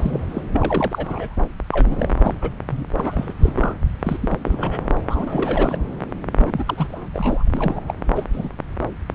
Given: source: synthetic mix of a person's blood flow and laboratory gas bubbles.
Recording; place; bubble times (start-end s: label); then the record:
Doppler ultrasound of blood flow; subclavian vein
0.00-0.45 s: bubbles
0.53-1.35 s: bubbles
1.72-2.09 s: bubbles
2.12-2.34 s: bubbles
2.41-2.50 s: bubbles
2.69-2.83 s: bubbles
2.98-3.33 s: bubbles
3.42-3.53 s: bubbles
3.56-3.75 s: bubbles
4.03-4.17 s: bubbles
4.21-4.38 s: bubbles
4.44-4.82 s: bubbles
5.08-5.79 s: bubbles
6.38-7.08 s: bubbles
7.13-7.48 s: bubbles
7.53-7.81 s: bubbles
7.87-7.94 s: bubbles
8.15-8.24 s: bubbles
8.32-8.48 s: bubbles
From the record:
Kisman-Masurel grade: 332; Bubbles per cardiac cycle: rolling drumbeat, 9 or more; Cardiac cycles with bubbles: 50 to 99%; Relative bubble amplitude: moderate (0.250 to 0.450); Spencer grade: 3 (all of the cardiac periods contain showers or single bubble signals, but not dominating or overriding the cardiac motion signals); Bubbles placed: anywhere in the cardiac cycle